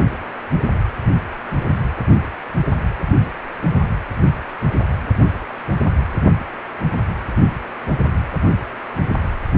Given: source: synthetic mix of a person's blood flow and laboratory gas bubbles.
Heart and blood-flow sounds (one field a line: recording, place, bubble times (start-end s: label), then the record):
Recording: Doppler ultrasound of blood flow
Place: precordium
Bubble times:
no bubbles
From the record:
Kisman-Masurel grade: 000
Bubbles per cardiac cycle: 0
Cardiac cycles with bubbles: 0%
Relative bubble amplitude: no bubbles discernible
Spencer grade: 0 (complete lack of bubble signals)